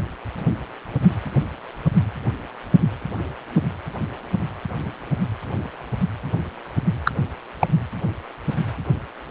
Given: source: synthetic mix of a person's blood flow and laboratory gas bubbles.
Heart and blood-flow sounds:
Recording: Doppler ultrasound of blood flow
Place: precordium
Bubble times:
7.05-7.11 s: bubbles
7.59-7.67 s: bubbles
From the record:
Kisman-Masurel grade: 113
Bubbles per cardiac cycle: 1 to 2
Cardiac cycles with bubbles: 1 to 10%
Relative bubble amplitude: loud (0.450 to 0.775)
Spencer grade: 1 (occasional bubble signal discernible with the cardiac motion signal, with majority of cardiac periods free of bubbles)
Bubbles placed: anywhere in the cardiac cycle

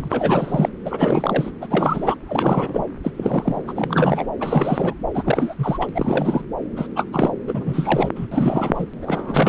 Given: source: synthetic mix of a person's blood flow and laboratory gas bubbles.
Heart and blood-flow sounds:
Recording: Doppler ultrasound of blood flow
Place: subclavian vein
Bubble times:
0.00-0.69 s: bubbles
0.85-1.51 s: bubbles
1.61-1.67 s: bubbles
1.70-2.15 s: bubbles
2.27-2.84 s: bubbles
3.04-3.11 s: bubbles
3.17-3.62 s: bubbles
3.67-4.27 s: bubbles
4.40-4.93 s: bubbles
5.14-5.54 s: bubbles
5.58-5.91 s: bubbles
5.95-6.42 s: bubbles
6.76-6.87 s: bubbles
6.96-7.04 s: bubbles
7.12-7.33 s: bubbles
7.47-8.10 s: bubbles
8.15-8.27 s: bubbles
8.31-8.86 s: bubbles
9.02-9.49 s: bubbles
From the record:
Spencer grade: 3 (all of the cardiac periods contain showers or single bubble signals, but not dominating or overriding the cardiac motion signals)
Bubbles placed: anywhere in the cardiac cycle

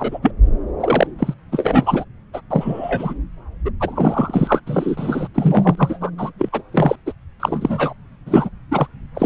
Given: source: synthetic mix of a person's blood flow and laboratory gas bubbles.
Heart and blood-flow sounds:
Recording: Doppler ultrasound of blood flow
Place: subclavian vein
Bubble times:
0.00-0.19 s: bubbles
0.22-0.32 s: bubbles
0.80-1.07 s: bubbles
1.19-1.34 s: bubbles
1.52-2.04 s: bubbles
2.33-2.41 s: bubbles
2.50-3.13 s: bubbles
3.65-3.71 s: bubbles
3.79-4.60 s: bubbles
4.66-5.28 s: bubbles
5.34-6.10 s: bubbles
6.18-6.30 s: bubbles
6.38-6.49 s: bubbles
6.52-6.62 s: bubbles
6.73-6.96 s: bubbles
7.06-7.12 s: bubbles
7.39-7.93 s: bubbles
8.26-8.49 s: bubbles
8.71-8.87 s: bubbles
9.14-9.26 s: bubbles
From the record:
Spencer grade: 3 (all of the cardiac periods contain showers or single bubble signals, but not dominating or overriding the cardiac motion signals)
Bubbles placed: anywhere in the cardiac cycle

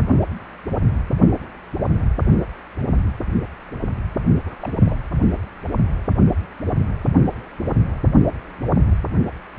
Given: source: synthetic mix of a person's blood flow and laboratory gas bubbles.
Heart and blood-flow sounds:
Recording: Doppler ultrasound of blood flow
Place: precordium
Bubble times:
4.45-4.73 s: bubbles
4.79-4.96 s: bubbles
From the record:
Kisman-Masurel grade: 211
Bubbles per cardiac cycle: several, 3 to 8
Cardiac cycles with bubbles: 1 to 10%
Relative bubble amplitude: barely perceptible (0.100 to 0.250)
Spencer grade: 1 (occasional bubble signal discernible with the cardiac motion signal, with majority of cardiac periods free of bubbles)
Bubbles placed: anywhere in the cardiac cycle

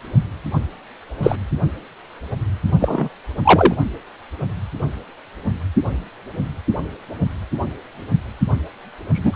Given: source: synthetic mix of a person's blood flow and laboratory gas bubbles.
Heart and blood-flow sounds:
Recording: Doppler ultrasound of blood flow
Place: precordium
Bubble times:
1.23-1.35 s: bubbles
2.79-3.08 s: bubbles
3.44-3.74 s: bubbles
9.14-9.36 s: bubbles
From the record:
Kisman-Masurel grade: 123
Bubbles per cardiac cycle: 1 to 2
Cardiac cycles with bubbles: 10 to 50%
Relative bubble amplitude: loud (0.450 to 0.775)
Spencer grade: 2 (many but less than half of the cardiac periods contain bubble signals, singularly or in groups)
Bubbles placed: only in the low amplitude regions of the cardiac cycle

